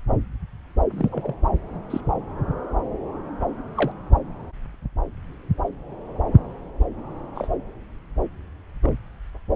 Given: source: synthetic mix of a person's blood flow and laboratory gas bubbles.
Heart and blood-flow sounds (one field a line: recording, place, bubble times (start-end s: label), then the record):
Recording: Doppler ultrasound of blood flow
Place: subclavian vein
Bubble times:
0.91-1.09 s: bubbles
1.11-1.34 s: bubbles
1.90-2.00 s: bubbles
3.75-3.92 s: bubbles
7.34-7.47 s: bubbles
8.82-8.91 s: bubbles
From the record:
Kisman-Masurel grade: 121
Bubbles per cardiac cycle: 1 to 2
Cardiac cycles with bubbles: 10 to 50%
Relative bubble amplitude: barely perceptible (0.100 to 0.250)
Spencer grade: 2 (many but less than half of the cardiac periods contain bubble signals, singularly or in groups)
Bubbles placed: anywhere in the cardiac cycle